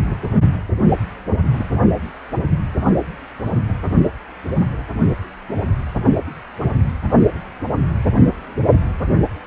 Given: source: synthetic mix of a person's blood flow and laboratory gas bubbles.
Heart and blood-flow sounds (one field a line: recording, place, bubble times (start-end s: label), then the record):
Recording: Doppler ultrasound of blood flow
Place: precordium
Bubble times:
0.78-0.85 s: bubbles
1.57-1.67 s: bubbles
From the record:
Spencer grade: 1 (occasional bubble signal discernible with the cardiac motion signal, with majority of cardiac periods free of bubbles)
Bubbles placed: only in the low amplitude regions of the cardiac cycle